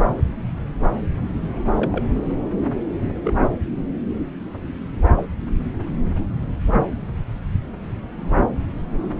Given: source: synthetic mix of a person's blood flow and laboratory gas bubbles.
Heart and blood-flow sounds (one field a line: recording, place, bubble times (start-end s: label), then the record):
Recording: Doppler ultrasound of blood flow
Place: subclavian vein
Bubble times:
1.77-2.03 s: bubbles
3.24-3.33 s: bubbles
5.16-5.24 s: bubbles
From the record:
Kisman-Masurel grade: 121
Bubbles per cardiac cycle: 1 to 2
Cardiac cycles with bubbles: 10 to 50%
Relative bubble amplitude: barely perceptible (0.100 to 0.250)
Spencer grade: 2 (many but less than half of the cardiac periods contain bubble signals, singularly or in groups)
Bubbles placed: anywhere in the cardiac cycle